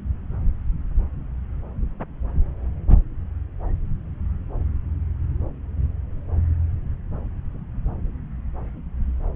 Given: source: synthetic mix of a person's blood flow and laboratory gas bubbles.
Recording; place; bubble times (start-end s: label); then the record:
Doppler ultrasound of blood flow; subclavian vein
no bubbles
From the record:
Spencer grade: 0 (complete lack of bubble signals)